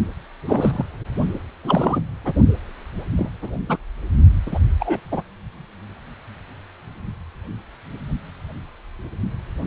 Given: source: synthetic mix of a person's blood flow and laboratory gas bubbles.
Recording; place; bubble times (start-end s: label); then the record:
Doppler ultrasound of blood flow; precordium
0.47-0.84 s: bubbles
1.63-2.01 s: bubbles
2.25-2.33 s: bubbles
3.17-3.30 s: bubbles
3.42-3.51 s: bubbles
3.68-3.77 s: bubbles
4.46-4.59 s: bubbles
4.79-5.00 s: bubbles
5.12-5.22 s: bubbles
From the record:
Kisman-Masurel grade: 232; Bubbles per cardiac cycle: several, 3 to 8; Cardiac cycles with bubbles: 50 to 99%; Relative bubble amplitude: moderate (0.250 to 0.450); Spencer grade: 3 (all of the cardiac periods contain showers or single bubble signals, but not dominating or overriding the cardiac motion signals); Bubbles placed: only in the low amplitude regions of the cardiac cycle